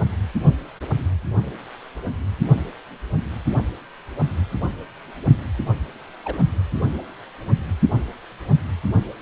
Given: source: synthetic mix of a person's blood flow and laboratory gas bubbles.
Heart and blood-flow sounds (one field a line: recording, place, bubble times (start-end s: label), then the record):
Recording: Doppler ultrasound of blood flow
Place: precordium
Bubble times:
0.47-0.51 s: bubbles
6.24-6.45 s: bubbles
From the record:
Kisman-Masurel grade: 121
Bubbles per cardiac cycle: 1 to 2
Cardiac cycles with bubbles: 10 to 50%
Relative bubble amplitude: barely perceptible (0.100 to 0.250)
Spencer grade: 2 (many but less than half of the cardiac periods contain bubble signals, singularly or in groups)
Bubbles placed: anywhere in the cardiac cycle